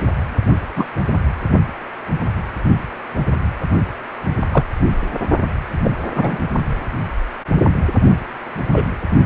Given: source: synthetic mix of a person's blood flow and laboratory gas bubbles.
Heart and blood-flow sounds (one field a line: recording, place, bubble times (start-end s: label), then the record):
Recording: Doppler ultrasound of blood flow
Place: precordium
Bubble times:
0.75-0.85 s: bubbles
4.51-4.64 s: bubbles
5.84-5.90 s: bubbles
6.16-6.37 s: bubbles
8.74-8.85 s: bubbles
From the record:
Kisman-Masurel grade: 123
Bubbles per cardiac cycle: 1 to 2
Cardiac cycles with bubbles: 10 to 50%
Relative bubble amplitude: loud (0.450 to 0.775)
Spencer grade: 2 (many but less than half of the cardiac periods contain bubble signals, singularly or in groups)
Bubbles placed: only in the low amplitude regions of the cardiac cycle